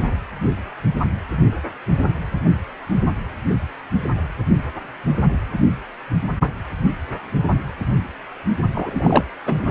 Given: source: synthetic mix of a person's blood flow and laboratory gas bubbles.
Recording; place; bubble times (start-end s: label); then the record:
Doppler ultrasound of blood flow; precordium
8.74-9.24 s: bubbles
9.46-9.71 s: bubbles
From the record:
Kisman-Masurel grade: 223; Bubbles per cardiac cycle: several, 3 to 8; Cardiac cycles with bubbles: 10 to 50%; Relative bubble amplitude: loud (0.450 to 0.775); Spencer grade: 2 (many but less than half of the cardiac periods contain bubble signals, singularly or in groups); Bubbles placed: only in the low amplitude regions of the cardiac cycle